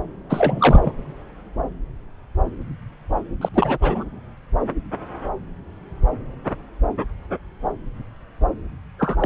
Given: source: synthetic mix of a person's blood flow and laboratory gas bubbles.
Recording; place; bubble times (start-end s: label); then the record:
Doppler ultrasound of blood flow; subclavian vein
0.29-0.92 s: bubbles
3.41-3.48 s: bubbles
3.54-3.78 s: bubbles
3.81-4.04 s: bubbles
8.98-9.16 s: bubbles
9.19-9.26 s: bubbles
From the record:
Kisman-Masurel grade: 223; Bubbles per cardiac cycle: several, 3 to 8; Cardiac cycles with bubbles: 10 to 50%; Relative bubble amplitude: loud (0.450 to 0.775); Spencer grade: 2 (many but less than half of the cardiac periods contain bubble signals, singularly or in groups); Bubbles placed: anywhere in the cardiac cycle